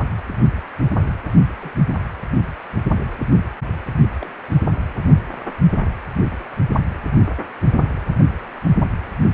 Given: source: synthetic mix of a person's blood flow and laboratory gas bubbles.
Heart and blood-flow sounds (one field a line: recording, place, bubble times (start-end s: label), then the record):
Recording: Doppler ultrasound of blood flow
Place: precordium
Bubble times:
1.61-1.76 s: bubbles
4.21-4.31 s: bubbles
From the record:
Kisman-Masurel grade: 121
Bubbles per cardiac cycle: 1 to 2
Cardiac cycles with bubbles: 10 to 50%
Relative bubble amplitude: barely perceptible (0.100 to 0.250)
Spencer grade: 2 (many but less than half of the cardiac periods contain bubble signals, singularly or in groups)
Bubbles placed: only in the low amplitude regions of the cardiac cycle